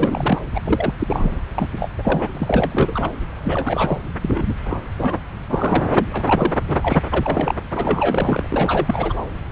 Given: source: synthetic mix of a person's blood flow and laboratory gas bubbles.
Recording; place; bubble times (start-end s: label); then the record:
Doppler ultrasound of blood flow; subclavian vein
0.00-0.39 s: bubbles
0.54-0.60 s: bubbles
0.65-0.94 s: bubbles
0.99-1.33 s: bubbles
1.55-1.68 s: bubbles
1.77-1.91 s: bubbles
1.97-2.29 s: bubbles
2.35-3.10 s: bubbles
3.44-4.00 s: bubbles
4.21-4.54 s: bubbles
4.66-4.77 s: bubbles
4.97-5.20 s: bubbles
5.50-6.23 s: bubbles
6.25-6.53 s: bubbles
6.68-6.76 s: bubbles
6.83-7.04 s: bubbles
7.10-7.54 s: bubbles
7.71-9.15 s: bubbles
9.49-9.52 s: bubbles
From the record:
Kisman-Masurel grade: 342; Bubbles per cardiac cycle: rolling drumbeat, 9 or more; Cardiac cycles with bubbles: 100%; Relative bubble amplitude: moderate (0.250 to 0.450); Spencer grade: 3 (all of the cardiac periods contain showers or single bubble signals, but not dominating or overriding the cardiac motion signals); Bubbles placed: anywhere in the cardiac cycle